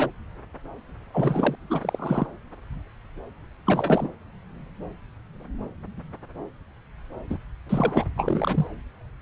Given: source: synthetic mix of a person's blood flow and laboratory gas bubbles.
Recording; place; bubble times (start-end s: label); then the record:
Doppler ultrasound of blood flow; subclavian vein
0.00-0.10 s: bubbles
1.13-1.56 s: bubbles
1.70-2.27 s: bubbles
3.67-4.08 s: bubbles
7.29-7.37 s: bubbles
7.69-8.04 s: bubbles
8.15-8.67 s: bubbles
From the record:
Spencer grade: 2 (many but less than half of the cardiac periods contain bubble signals, singularly or in groups); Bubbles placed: anywhere in the cardiac cycle